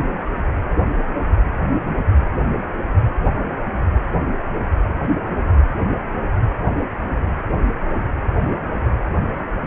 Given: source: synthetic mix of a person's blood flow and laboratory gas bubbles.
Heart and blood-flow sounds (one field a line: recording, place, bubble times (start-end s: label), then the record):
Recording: Doppler ultrasound of blood flow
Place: precordium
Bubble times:
no bubbles
From the record:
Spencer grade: 0 (complete lack of bubble signals)